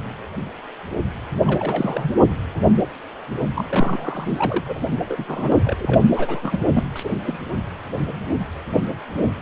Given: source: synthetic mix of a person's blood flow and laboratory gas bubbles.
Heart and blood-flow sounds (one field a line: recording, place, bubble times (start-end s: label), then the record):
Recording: Doppler ultrasound of blood flow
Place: precordium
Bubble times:
1.45-2.15 s: bubbles
3.56-3.65 s: bubbles
3.68-4.82 s: bubbles
5.09-5.25 s: bubbles
5.28-5.59 s: bubbles
5.64-6.02 s: bubbles
6.16-6.58 s: bubbles
6.73-6.83 s: bubbles
6.96-7.17 s: bubbles
7.25-7.46 s: bubbles
From the record:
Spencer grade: 3 (all of the cardiac periods contain showers or single bubble signals, but not dominating or overriding the cardiac motion signals)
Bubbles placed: only in the low amplitude regions of the cardiac cycle